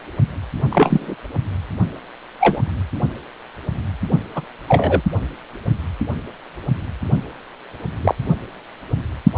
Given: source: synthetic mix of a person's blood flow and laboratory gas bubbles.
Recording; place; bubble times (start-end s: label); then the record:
Doppler ultrasound of blood flow; precordium
0.70-1.15 s: bubbles
2.40-2.62 s: bubbles
4.34-4.45 s: bubbles
4.68-5.01 s: bubbles
8.02-8.14 s: bubbles
From the record:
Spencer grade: 2 (many but less than half of the cardiac periods contain bubble signals, singularly or in groups); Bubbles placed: only in the low amplitude regions of the cardiac cycle